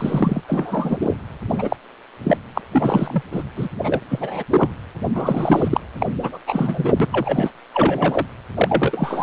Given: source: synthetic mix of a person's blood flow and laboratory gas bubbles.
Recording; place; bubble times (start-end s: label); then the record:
Doppler ultrasound of blood flow; precordium
0.00-0.41 s: bubbles
0.47-0.97 s: bubbles
1.00-1.15 s: bubbles
1.48-1.76 s: bubbles
2.23-2.37 s: bubbles
2.54-2.61 s: bubbles
2.71-3.23 s: bubbles
3.32-3.43 s: bubbles
3.56-3.68 s: bubbles
3.83-4.00 s: bubbles
4.09-4.43 s: bubbles
4.51-4.69 s: bubbles
5.14-5.80 s: bubbles
6.00-6.06 s: bubbles
6.21-6.38 s: bubbles
6.46-6.93 s: bubbles
7.00-7.07 s: bubbles
7.12-7.50 s: bubbles
7.74-8.26 s: bubbles
8.57-9.23 s: bubbles
From the record:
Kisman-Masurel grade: 243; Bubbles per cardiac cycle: several, 3 to 8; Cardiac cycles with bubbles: 100%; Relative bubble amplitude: loud (0.450 to 0.775); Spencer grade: 3 (all of the cardiac periods contain showers or single bubble signals, but not dominating or overriding the cardiac motion signals); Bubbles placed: anywhere in the cardiac cycle